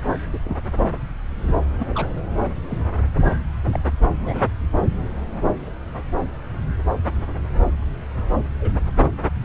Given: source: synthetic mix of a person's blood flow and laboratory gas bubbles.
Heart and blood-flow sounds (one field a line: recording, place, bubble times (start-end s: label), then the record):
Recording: Doppler ultrasound of blood flow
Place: subclavian vein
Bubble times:
0.33-0.39 s: bubbles
0.45-0.56 s: bubbles
1.79-1.85 s: bubbles
1.88-2.09 s: bubbles
2.69-2.78 s: bubbles
3.70-3.79 s: bubbles
4.20-4.48 s: bubbles
8.60-8.71 s: bubbles
From the record:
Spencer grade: 2 (many but less than half of the cardiac periods contain bubble signals, singularly or in groups)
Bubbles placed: anywhere in the cardiac cycle